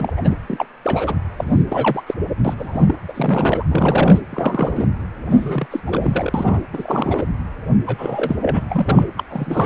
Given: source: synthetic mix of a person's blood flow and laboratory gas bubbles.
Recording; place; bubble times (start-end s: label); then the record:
Doppler ultrasound of blood flow; precordium
0.00-0.13 s: bubbles
0.17-0.37 s: bubbles
0.47-0.66 s: bubbles
0.83-1.16 s: bubbles
1.36-1.65 s: bubbles
1.69-2.03 s: bubbles
2.07-2.14 s: bubbles
2.44-2.94 s: bubbles
3.07-3.63 s: bubbles
3.71-4.21 s: bubbles
4.30-4.88 s: bubbles
5.30-5.67 s: bubbles
5.71-5.82 s: bubbles
5.87-6.60 s: bubbles
6.73-7.25 s: bubbles
7.86-8.37 s: bubbles
8.41-8.62 s: bubbles
8.70-9.06 s: bubbles
9.17-9.23 s: bubbles
9.29-9.66 s: bubbles
From the record:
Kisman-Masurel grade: 342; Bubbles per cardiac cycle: rolling drumbeat, 9 or more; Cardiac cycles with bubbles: 100%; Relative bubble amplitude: moderate (0.250 to 0.450); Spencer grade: 3 (all of the cardiac periods contain showers or single bubble signals, but not dominating or overriding the cardiac motion signals); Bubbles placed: anywhere in the cardiac cycle